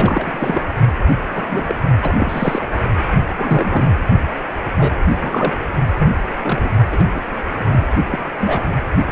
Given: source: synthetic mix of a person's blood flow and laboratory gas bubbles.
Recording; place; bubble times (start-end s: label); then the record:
Doppler ultrasound of blood flow; precordium
0.00-0.64 s: bubbles
1.33-1.75 s: bubbles
2.02-2.69 s: bubbles
3.35-3.94 s: bubbles
4.77-4.94 s: bubbles
5.07-5.57 s: bubbles
5.98-6.09 s: bubbles
6.42-6.74 s: bubbles
6.90-7.05 s: bubbles
7.14-7.22 s: bubbles
7.53-7.87 s: bubbles
8.10-8.19 s: bubbles
8.40-8.67 s: bubbles
9.07-9.12 s: bubbles
From the record:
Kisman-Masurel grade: 242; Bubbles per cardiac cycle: several, 3 to 8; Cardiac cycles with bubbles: 100%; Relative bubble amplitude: moderate (0.250 to 0.450); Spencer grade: 3 (all of the cardiac periods contain showers or single bubble signals, but not dominating or overriding the cardiac motion signals); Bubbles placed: only in the low amplitude regions of the cardiac cycle